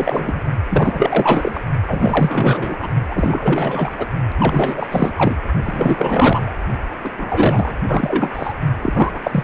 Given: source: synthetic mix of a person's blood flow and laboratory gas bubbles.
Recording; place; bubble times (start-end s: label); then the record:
Doppler ultrasound of blood flow; precordium
0.00-0.43 s: bubbles
0.69-1.61 s: bubbles
1.87-2.89 s: bubbles
3.08-4.07 s: bubbles
4.38-5.13 s: bubbles
5.17-5.36 s: bubbles
5.65-6.56 s: bubbles
7.04-7.11 s: bubbles
7.17-7.74 s: bubbles
7.88-8.30 s: bubbles
8.34-8.54 s: bubbles
8.81-9.19 s: bubbles
9.22-9.44 s: bubbles
From the record:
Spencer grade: 4 (maximum detectable bubble signal sounding continuously throughout systole and diastole of every cardiac period, and overriding the amplitude of the normal cardiac signals); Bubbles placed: only in the low amplitude regions of the cardiac cycle